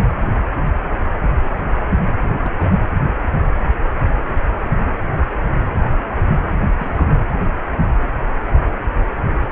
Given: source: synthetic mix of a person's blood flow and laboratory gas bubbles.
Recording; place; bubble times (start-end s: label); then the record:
Doppler ultrasound of blood flow; precordium
2.42-2.86 s: bubbles
6.79-7.05 s: bubbles
From the record:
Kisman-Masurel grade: 121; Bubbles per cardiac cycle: 1 to 2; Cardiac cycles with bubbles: 10 to 50%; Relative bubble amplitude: barely perceptible (0.100 to 0.250); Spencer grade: 2 (many but less than half of the cardiac periods contain bubble signals, singularly or in groups); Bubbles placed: anywhere in the cardiac cycle